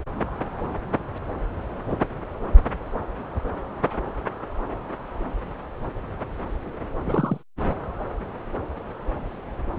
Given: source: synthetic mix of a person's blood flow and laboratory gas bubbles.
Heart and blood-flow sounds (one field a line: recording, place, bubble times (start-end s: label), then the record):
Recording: Doppler ultrasound of blood flow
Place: subclavian vein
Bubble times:
7.04-7.42 s: bubbles
From the record:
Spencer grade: 1 (occasional bubble signal discernible with the cardiac motion signal, with majority of cardiac periods free of bubbles)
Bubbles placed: anywhere in the cardiac cycle